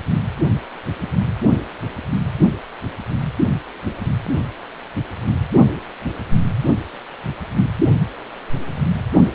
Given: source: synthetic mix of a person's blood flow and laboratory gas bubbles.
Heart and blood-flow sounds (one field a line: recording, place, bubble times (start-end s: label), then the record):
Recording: Doppler ultrasound of blood flow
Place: precordium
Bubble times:
no bubbles
From the record:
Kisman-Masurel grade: 000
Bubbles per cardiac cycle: 0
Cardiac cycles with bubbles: 0%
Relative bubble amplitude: no bubbles discernible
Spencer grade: 0 (complete lack of bubble signals)